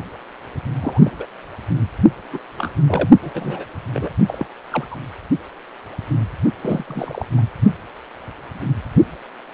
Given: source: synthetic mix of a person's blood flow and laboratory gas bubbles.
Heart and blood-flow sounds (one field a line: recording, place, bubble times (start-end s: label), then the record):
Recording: Doppler ultrasound of blood flow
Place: precordium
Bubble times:
0.81-1.11 s: bubbles
1.19-1.25 s: bubbles
2.31-2.39 s: bubbles
2.58-2.73 s: bubbles
2.88-3.09 s: bubbles
3.21-3.31 s: bubbles
3.34-3.65 s: bubbles
3.94-4.10 s: bubbles
4.28-4.47 s: bubbles
4.71-4.87 s: bubbles
4.91-4.96 s: bubbles
6.61-7.28 s: bubbles
7.38-7.43 s: bubbles
From the record:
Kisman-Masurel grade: 222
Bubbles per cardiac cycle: several, 3 to 8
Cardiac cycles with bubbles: 10 to 50%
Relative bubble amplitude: moderate (0.250 to 0.450)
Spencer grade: 2 (many but less than half of the cardiac periods contain bubble signals, singularly or in groups)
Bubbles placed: only in the low amplitude regions of the cardiac cycle